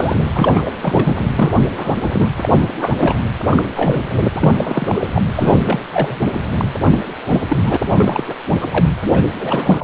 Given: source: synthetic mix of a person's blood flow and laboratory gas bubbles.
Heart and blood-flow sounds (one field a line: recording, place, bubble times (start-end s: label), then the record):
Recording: Doppler ultrasound of blood flow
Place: precordium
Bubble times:
0.00-0.16 s: bubbles
0.34-0.71 s: bubbles
0.81-1.14 s: bubbles
1.35-1.60 s: bubbles
1.73-1.95 s: bubbles
2.00-2.28 s: bubbles
2.37-2.68 s: bubbles
2.79-2.94 s: bubbles
2.98-3.26 s: bubbles
3.51-3.62 s: bubbles
3.76-4.15 s: bubbles
4.35-5.07 s: bubbles
5.14-5.22 s: bubbles
5.35-5.80 s: bubbles
5.93-6.17 s: bubbles
6.58-6.67 s: bubbles
6.90-6.99 s: bubbles
7.27-7.42 s: bubbles
7.48-7.63 s: bubbles
7.66-7.76 s: bubbles
7.86-8.24 s: bubbles
8.27-8.34 s: bubbles
8.61-8.68 s: bubbles
8.72-8.85 s: bubbles
9.13-9.23 s: bubbles
9.38-9.84 s: bubbles
From the record:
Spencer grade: 3 (all of the cardiac periods contain showers or single bubble signals, but not dominating or overriding the cardiac motion signals)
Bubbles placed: anywhere in the cardiac cycle